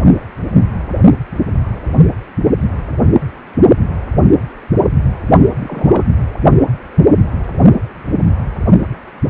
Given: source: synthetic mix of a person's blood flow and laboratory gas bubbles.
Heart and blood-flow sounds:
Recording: Doppler ultrasound of blood flow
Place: precordium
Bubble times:
5.60-6.11 s: bubbles
From the record:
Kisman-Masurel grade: 221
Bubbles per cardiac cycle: several, 3 to 8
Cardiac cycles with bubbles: 10 to 50%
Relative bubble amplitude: barely perceptible (0.100 to 0.250)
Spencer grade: 2 (many but less than half of the cardiac periods contain bubble signals, singularly or in groups)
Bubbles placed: only in the low amplitude regions of the cardiac cycle

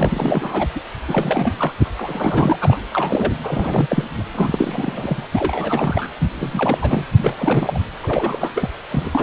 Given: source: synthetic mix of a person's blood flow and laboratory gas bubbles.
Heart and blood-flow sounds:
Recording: Doppler ultrasound of blood flow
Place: precordium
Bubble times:
0.00-0.67 s: bubbles
0.76-0.80 s: bubbles
1.08-1.54 s: bubbles
1.57-1.72 s: bubbles
1.78-1.86 s: bubbles
1.96-2.57 s: bubbles
2.60-2.78 s: bubbles
2.92-3.32 s: bubbles
3.43-3.87 s: bubbles
3.90-4.04 s: bubbles
4.17-4.24 s: bubbles
4.34-5.28 s: bubbles
5.33-6.12 s: bubbles
6.19-6.28 s: bubbles
6.40-6.78 s: bubbles
6.81-7.04 s: bubbles
7.13-7.79 s: bubbles
8.03-8.51 s: bubbles
8.55-8.70 s: bubbles
8.89-9.23 s: bubbles
From the record:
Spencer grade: 3 (all of the cardiac periods contain showers or single bubble signals, but not dominating or overriding the cardiac motion signals)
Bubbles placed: anywhere in the cardiac cycle

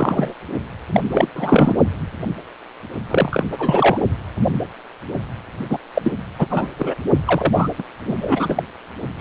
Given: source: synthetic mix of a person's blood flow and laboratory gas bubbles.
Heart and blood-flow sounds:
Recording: Doppler ultrasound of blood flow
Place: precordium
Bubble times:
0.00-0.33 s: bubbles
0.92-1.00 s: bubbles
1.12-1.27 s: bubbles
1.35-1.75 s: bubbles
3.08-3.45 s: bubbles
3.52-3.98 s: bubbles
5.69-5.78 s: bubbles
5.94-6.12 s: bubbles
6.38-6.47 s: bubbles
6.50-6.68 s: bubbles
6.79-6.94 s: bubbles
7.25-7.68 s: bubbles
7.78-7.83 s: bubbles
8.06-8.14 s: bubbles
8.20-8.63 s: bubbles
9.18-9.21 s: bubbles
From the record:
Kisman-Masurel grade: 333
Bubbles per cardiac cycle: rolling drumbeat, 9 or more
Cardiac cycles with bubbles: 50 to 99%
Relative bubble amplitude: loud (0.450 to 0.775)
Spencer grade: 3 (all of the cardiac periods contain showers or single bubble signals, but not dominating or overriding the cardiac motion signals)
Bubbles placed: only in the low amplitude regions of the cardiac cycle

